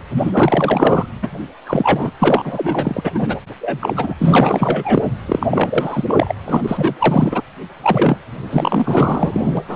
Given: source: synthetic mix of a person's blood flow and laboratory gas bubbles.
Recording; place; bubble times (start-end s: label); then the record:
Doppler ultrasound of blood flow; precordium
0.00-0.02 s: bubbles
0.16-1.07 s: bubbles
1.22-1.28 s: bubbles
1.66-2.11 s: bubbles
2.19-3.11 s: bubbles
3.14-3.36 s: bubbles
3.60-3.93 s: bubbles
3.96-4.14 s: bubbles
4.19-5.06 s: bubbles
5.26-5.46 s: bubbles
5.50-6.04 s: bubbles
6.08-6.34 s: bubbles
6.45-7.42 s: bubbles
7.82-8.18 s: bubbles
8.50-9.62 s: bubbles
9.68-9.76 s: bubbles
From the record:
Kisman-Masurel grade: 444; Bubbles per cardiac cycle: continuous sound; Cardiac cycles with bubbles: 100%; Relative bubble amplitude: maximal (0.775 to 0.999); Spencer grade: 4 (maximum detectable bubble signal sounding continuously throughout systole and diastole of every cardiac period, and overriding the amplitude of the normal cardiac signals); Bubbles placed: anywhere in the cardiac cycle